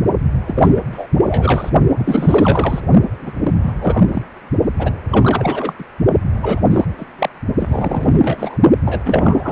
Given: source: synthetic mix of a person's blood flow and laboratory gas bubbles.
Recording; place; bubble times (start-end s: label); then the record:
Doppler ultrasound of blood flow; precordium
0.46-0.71 s: bubbles
0.75-0.82 s: bubbles
0.92-1.06 s: bubbles
1.23-1.70 s: bubbles
1.99-2.80 s: bubbles
3.07-3.36 s: bubbles
3.42-3.53 s: bubbles
3.62-4.10 s: bubbles
4.13-4.22 s: bubbles
4.78-4.92 s: bubbles
5.11-5.73 s: bubbles
5.79-5.84 s: bubbles
6.41-6.60 s: bubbles
6.70-6.88 s: bubbles
6.98-7.05 s: bubbles
7.18-7.29 s: bubbles
7.59-8.59 s: bubbles
8.85-9.02 s: bubbles
9.05-9.52 s: bubbles
From the record:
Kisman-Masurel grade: 343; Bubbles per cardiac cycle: rolling drumbeat, 9 or more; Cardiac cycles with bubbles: 100%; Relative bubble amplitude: loud (0.450 to 0.775); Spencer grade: 3 (all of the cardiac periods contain showers or single bubble signals, but not dominating or overriding the cardiac motion signals); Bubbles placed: only in the low amplitude regions of the cardiac cycle